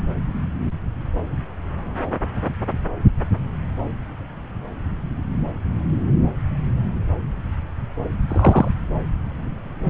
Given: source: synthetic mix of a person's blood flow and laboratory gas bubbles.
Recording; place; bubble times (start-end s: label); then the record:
Doppler ultrasound of blood flow; subclavian vein
8.29-8.68 s: bubbles
From the record:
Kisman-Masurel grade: 113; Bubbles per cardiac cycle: 1 to 2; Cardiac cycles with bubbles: 1 to 10%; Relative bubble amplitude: loud (0.450 to 0.775); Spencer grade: 1 (occasional bubble signal discernible with the cardiac motion signal, with majority of cardiac periods free of bubbles); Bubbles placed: anywhere in the cardiac cycle